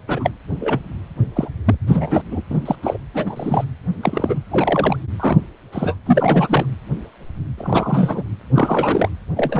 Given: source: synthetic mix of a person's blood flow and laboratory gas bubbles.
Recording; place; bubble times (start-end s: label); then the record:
Doppler ultrasound of blood flow; precordium
0.07-0.30 s: bubbles
0.59-0.79 s: bubbles
1.35-1.49 s: bubbles
1.65-1.74 s: bubbles
1.87-2.22 s: bubbles
2.31-2.42 s: bubbles
2.50-2.58 s: bubbles
2.65-2.76 s: bubbles
2.83-2.97 s: bubbles
3.14-3.65 s: bubbles
4.03-4.39 s: bubbles
4.50-4.96 s: bubbles
5.19-5.38 s: bubbles
5.72-5.95 s: bubbles
6.05-6.65 s: bubbles
7.57-8.23 s: bubbles
8.54-9.09 s: bubbles
9.36-9.60 s: bubbles
From the record:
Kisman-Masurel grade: 233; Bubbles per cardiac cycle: several, 3 to 8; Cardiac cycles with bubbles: 50 to 99%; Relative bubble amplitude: loud (0.450 to 0.775); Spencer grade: 3 (all of the cardiac periods contain showers or single bubble signals, but not dominating or overriding the cardiac motion signals); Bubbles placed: anywhere in the cardiac cycle